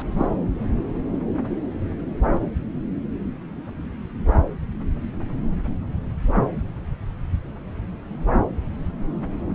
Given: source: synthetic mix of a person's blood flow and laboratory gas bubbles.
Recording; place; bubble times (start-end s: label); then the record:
Doppler ultrasound of blood flow; subclavian vein
0.00-0.02 s: bubbles
0.11-0.29 s: bubbles
From the record:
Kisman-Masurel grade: 112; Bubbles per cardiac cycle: 1 to 2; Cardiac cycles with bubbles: 1 to 10%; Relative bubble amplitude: moderate (0.250 to 0.450); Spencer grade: 1 (occasional bubble signal discernible with the cardiac motion signal, with majority of cardiac periods free of bubbles); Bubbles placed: anywhere in the cardiac cycle